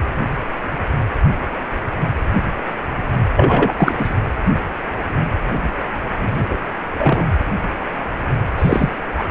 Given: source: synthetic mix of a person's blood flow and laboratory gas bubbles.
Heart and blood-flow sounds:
Doppler ultrasound of blood flow; precordium
3.35-3.73 s: bubbles
3.78-4.14 s: bubbles
6.49-6.59 s: bubbles
6.99-7.25 s: bubbles
8.59-8.89 s: bubbles
9.18-9.24 s: bubbles
From the record:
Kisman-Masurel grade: 223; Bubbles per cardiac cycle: several, 3 to 8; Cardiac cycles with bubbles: 10 to 50%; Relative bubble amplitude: loud (0.450 to 0.775); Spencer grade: 2 (many but less than half of the cardiac periods contain bubble signals, singularly or in groups); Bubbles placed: anywhere in the cardiac cycle

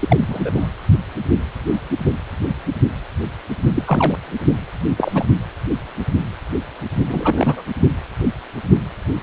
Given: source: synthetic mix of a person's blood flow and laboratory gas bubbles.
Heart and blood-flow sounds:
Doppler ultrasound of blood flow; precordium
0.00-0.68 s: bubbles
3.75-3.83 s: bubbles
3.85-4.17 s: bubbles
4.97-5.25 s: bubbles
7.07-7.62 s: bubbles
From the record:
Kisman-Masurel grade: 222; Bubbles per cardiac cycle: several, 3 to 8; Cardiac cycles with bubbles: 10 to 50%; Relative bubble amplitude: moderate (0.250 to 0.450); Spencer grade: 2 (many but less than half of the cardiac periods contain bubble signals, singularly or in groups); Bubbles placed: only in the low amplitude regions of the cardiac cycle

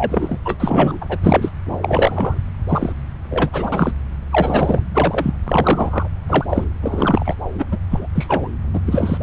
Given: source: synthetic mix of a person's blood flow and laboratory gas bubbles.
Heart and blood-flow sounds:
Doppler ultrasound of blood flow; subclavian vein
0.00-0.40 s: bubbles
0.45-0.55 s: bubbles
0.59-1.06 s: bubbles
1.09-1.18 s: bubbles
1.22-1.52 s: bubbles
1.65-1.77 s: bubbles
1.81-2.40 s: bubbles
2.69-2.92 s: bubbles
3.30-3.50 s: bubbles
3.52-3.92 s: bubbles
4.31-4.79 s: bubbles
4.94-5.33 s: bubbles
5.46-6.08 s: bubbles
6.29-6.64 s: bubbles
6.81-7.35 s: bubbles
7.57-7.65 s: bubbles
7.71-7.78 s: bubbles
7.90-8.07 s: bubbles
8.15-8.48 s: bubbles
8.73-8.80 s: bubbles
8.87-9.17 s: bubbles
From the record:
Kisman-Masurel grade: 243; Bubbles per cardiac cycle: several, 3 to 8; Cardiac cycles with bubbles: 100%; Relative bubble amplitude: loud (0.450 to 0.775); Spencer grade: 3 (all of the cardiac periods contain showers or single bubble signals, but not dominating or overriding the cardiac motion signals); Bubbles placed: anywhere in the cardiac cycle

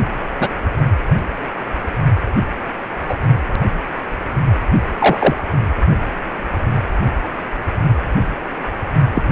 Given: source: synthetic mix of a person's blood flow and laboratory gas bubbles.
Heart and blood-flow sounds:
Doppler ultrasound of blood flow; precordium
0.40-0.49 s: bubbles
3.08-3.15 s: bubbles
4.97-5.45 s: bubbles
9.14-9.23 s: bubbles
From the record:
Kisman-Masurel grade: 123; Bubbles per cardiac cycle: 1 to 2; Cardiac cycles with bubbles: 10 to 50%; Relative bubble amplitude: loud (0.450 to 0.775); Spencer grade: 2 (many but less than half of the cardiac periods contain bubble signals, singularly or in groups); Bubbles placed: only in the low amplitude regions of the cardiac cycle

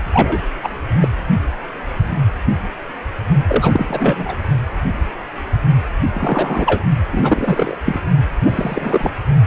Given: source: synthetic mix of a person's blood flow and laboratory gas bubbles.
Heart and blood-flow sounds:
Doppler ultrasound of blood flow; precordium
0.13-0.41 s: bubbles
0.62-0.69 s: bubbles
1.01-1.08 s: bubbles
3.44-4.36 s: bubbles
6.14-6.83 s: bubbles
7.10-7.77 s: bubbles
7.85-8.00 s: bubbles
8.40-9.11 s: bubbles
From the record:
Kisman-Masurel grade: 233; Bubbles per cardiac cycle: several, 3 to 8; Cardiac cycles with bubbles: 50 to 99%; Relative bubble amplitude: loud (0.450 to 0.775); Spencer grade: 3 (all of the cardiac periods contain showers or single bubble signals, but not dominating or overriding the cardiac motion signals); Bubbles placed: only in the low amplitude regions of the cardiac cycle

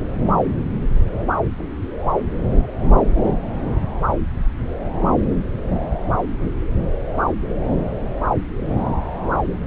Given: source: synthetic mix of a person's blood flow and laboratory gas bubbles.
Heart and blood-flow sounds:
Doppler ultrasound of blood flow; subclavian vein
1.31-1.35 s: bubbles
From the record:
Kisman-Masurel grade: 111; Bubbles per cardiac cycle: 1 to 2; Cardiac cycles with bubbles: 1 to 10%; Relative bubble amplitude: barely perceptible (0.100 to 0.250); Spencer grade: 1 (occasional bubble signal discernible with the cardiac motion signal, with majority of cardiac periods free of bubbles); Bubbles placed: anywhere in the cardiac cycle

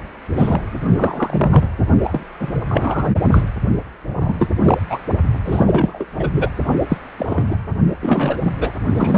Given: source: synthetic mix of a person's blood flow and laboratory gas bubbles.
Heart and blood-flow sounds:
Doppler ultrasound of blood flow; precordium
0.33-0.60 s: bubbles
0.96-1.68 s: bubbles
2.03-2.27 s: bubbles
2.39-2.52 s: bubbles
2.67-3.08 s: bubbles
3.31-3.43 s: bubbles
4.21-4.50 s: bubbles
4.62-4.81 s: bubbles
4.90-4.99 s: bubbles
5.45-6.05 s: bubbles
6.19-6.30 s: bubbles
6.33-6.50 s: bubbles
6.89-6.97 s: bubbles
7.17-7.56 s: bubbles
8.01-8.36 s: bubbles
8.44-8.51 s: bubbles
8.59-8.71 s: bubbles
8.92-9.18 s: bubbles
From the record:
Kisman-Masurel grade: 243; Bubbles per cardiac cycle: several, 3 to 8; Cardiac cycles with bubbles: 100%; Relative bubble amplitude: loud (0.450 to 0.775); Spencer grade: 3 (all of the cardiac periods contain showers or single bubble signals, but not dominating or overriding the cardiac motion signals); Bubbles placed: only in the low amplitude regions of the cardiac cycle

